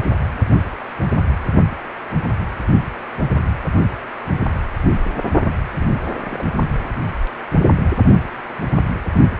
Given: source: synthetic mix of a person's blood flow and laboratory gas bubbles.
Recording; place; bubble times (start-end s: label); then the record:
Doppler ultrasound of blood flow; precordium
5.79-5.87 s: bubbles
6.16-6.42 s: bubbles
From the record:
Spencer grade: 1 (occasional bubble signal discernible with the cardiac motion signal, with majority of cardiac periods free of bubbles); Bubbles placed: only in the low amplitude regions of the cardiac cycle